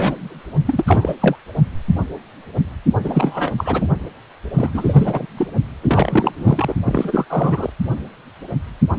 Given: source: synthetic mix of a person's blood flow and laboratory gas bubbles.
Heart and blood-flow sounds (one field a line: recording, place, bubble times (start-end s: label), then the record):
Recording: Doppler ultrasound of blood flow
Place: precordium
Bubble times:
0.00-0.41 s: bubbles
0.65-1.15 s: bubbles
1.20-1.35 s: bubbles
3.04-3.51 s: bubbles
3.57-3.86 s: bubbles
4.56-5.26 s: bubbles
5.37-5.47 s: bubbles
5.81-6.33 s: bubbles
6.38-6.75 s: bubbles
6.85-7.25 s: bubbles
7.29-7.70 s: bubbles
From the record:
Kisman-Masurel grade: 333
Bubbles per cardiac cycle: rolling drumbeat, 9 or more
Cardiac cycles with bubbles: 50 to 99%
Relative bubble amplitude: loud (0.450 to 0.775)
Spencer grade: 3 (all of the cardiac periods contain showers or single bubble signals, but not dominating or overriding the cardiac motion signals)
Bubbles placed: only in the low amplitude regions of the cardiac cycle